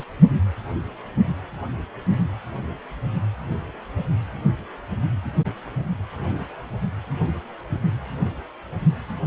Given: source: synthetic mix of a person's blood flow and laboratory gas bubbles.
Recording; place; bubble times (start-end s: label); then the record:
Doppler ultrasound of blood flow; precordium
0.00-0.04 s: bubbles
From the record:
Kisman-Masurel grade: 113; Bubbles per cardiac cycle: 1 to 2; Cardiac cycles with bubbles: 1 to 10%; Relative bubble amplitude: loud (0.450 to 0.775); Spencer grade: 1 (occasional bubble signal discernible with the cardiac motion signal, with majority of cardiac periods free of bubbles); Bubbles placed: only in the low amplitude regions of the cardiac cycle